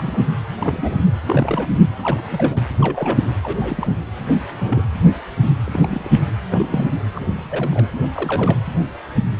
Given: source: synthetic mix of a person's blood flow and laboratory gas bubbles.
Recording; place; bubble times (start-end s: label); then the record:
Doppler ultrasound of blood flow; precordium
0.00-0.20 s: bubbles
0.59-1.04 s: bubbles
1.26-1.80 s: bubbles
2.02-2.65 s: bubbles
2.80-3.32 s: bubbles
3.43-3.96 s: bubbles
4.51-4.82 s: bubbles
5.64-6.20 s: bubbles
6.50-6.87 s: bubbles
7.15-7.86 s: bubbles
8.03-8.08 s: bubbles
8.14-8.57 s: bubbles
From the record:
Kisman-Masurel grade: 232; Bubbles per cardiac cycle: several, 3 to 8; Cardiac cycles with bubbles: 50 to 99%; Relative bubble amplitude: moderate (0.250 to 0.450); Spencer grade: 3 (all of the cardiac periods contain showers or single bubble signals, but not dominating or overriding the cardiac motion signals); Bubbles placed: anywhere in the cardiac cycle